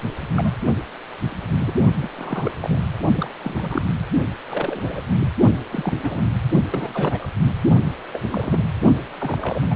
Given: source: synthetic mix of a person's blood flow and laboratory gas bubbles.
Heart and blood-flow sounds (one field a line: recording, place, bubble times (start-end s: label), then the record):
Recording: Doppler ultrasound of blood flow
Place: precordium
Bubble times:
0.22-0.28 s: bubbles
0.35-0.51 s: bubbles
1.30-1.73 s: bubbles
1.99-2.08 s: bubbles
2.17-2.55 s: bubbles
2.60-2.81 s: bubbles
3.16-3.33 s: bubbles
3.43-3.86 s: bubbles
4.49-5.02 s: bubbles
5.19-5.27 s: bubbles
5.72-6.23 s: bubbles
6.71-7.29 s: bubbles
8.12-8.20 s: bubbles
8.31-8.63 s: bubbles
9.18-9.75 s: bubbles
From the record:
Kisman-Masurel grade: 232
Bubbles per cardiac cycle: several, 3 to 8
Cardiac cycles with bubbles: 50 to 99%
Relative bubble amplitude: moderate (0.250 to 0.450)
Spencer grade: 3 (all of the cardiac periods contain showers or single bubble signals, but not dominating or overriding the cardiac motion signals)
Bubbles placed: only in the low amplitude regions of the cardiac cycle